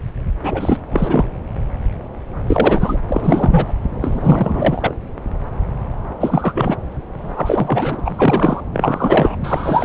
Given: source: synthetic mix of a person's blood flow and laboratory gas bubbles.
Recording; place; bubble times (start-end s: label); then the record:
Doppler ultrasound of blood flow; subclavian vein
0.43-0.82 s: bubbles
0.91-1.27 s: bubbles
2.46-2.98 s: bubbles
3.08-3.73 s: bubbles
4.00-4.95 s: bubbles
6.20-6.76 s: bubbles
7.17-8.00 s: bubbles
8.03-8.61 s: bubbles
8.73-9.36 s: bubbles
9.43-9.84 s: bubbles
From the record:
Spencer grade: 3 (all of the cardiac periods contain showers or single bubble signals, but not dominating or overriding the cardiac motion signals); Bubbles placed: anywhere in the cardiac cycle